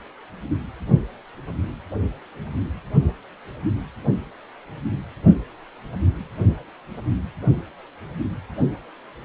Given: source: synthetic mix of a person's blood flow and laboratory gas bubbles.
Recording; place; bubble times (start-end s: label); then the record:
Doppler ultrasound of blood flow; precordium
no bubbles
From the record:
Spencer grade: 0 (complete lack of bubble signals)